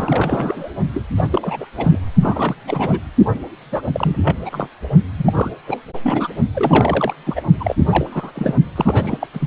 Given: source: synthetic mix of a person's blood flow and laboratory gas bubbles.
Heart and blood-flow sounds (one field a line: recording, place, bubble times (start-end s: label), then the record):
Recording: Doppler ultrasound of blood flow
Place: precordium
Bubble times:
0.00-0.70 s: bubbles
0.93-1.02 s: bubbles
1.17-1.28 s: bubbles
1.30-1.66 s: bubbles
1.77-1.98 s: bubbles
2.21-2.56 s: bubbles
2.67-3.00 s: bubbles
3.71-3.82 s: bubbles
3.86-3.91 s: bubbles
3.93-4.17 s: bubbles
4.24-4.34 s: bubbles
4.45-4.67 s: bubbles
5.17-5.50 s: bubbles
5.67-5.80 s: bubbles
6.03-6.28 s: bubbles
6.54-7.14 s: bubbles
7.25-7.41 s: bubbles
7.60-7.76 s: bubbles
7.90-8.07 s: bubbles
8.11-8.31 s: bubbles
8.35-8.54 s: bubbles
8.76-9.18 s: bubbles
9.21-9.28 s: bubbles
9.33-9.47 s: bubbles
From the record:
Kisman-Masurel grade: 342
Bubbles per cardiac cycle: rolling drumbeat, 9 or more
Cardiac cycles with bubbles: 100%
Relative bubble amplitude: moderate (0.250 to 0.450)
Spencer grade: 3 (all of the cardiac periods contain showers or single bubble signals, but not dominating or overriding the cardiac motion signals)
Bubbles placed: only in the low amplitude regions of the cardiac cycle